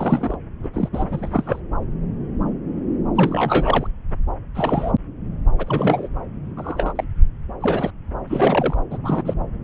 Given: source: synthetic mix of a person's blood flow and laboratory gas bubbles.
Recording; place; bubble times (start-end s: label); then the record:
Doppler ultrasound of blood flow; subclavian vein
0.00-0.37 s: bubbles
0.63-0.69 s: bubbles
0.73-0.89 s: bubbles
0.93-1.60 s: bubbles
3.15-3.87 s: bubbles
4.54-4.92 s: bubbles
5.58-6.08 s: bubbles
6.57-7.04 s: bubbles
7.61-7.91 s: bubbles
8.27-8.76 s: bubbles
8.90-8.97 s: bubbles
9.03-9.35 s: bubbles
From the record:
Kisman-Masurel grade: 232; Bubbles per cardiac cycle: several, 3 to 8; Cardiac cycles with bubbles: 50 to 99%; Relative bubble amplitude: moderate (0.250 to 0.450); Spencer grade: 3 (all of the cardiac periods contain showers or single bubble signals, but not dominating or overriding the cardiac motion signals); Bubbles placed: anywhere in the cardiac cycle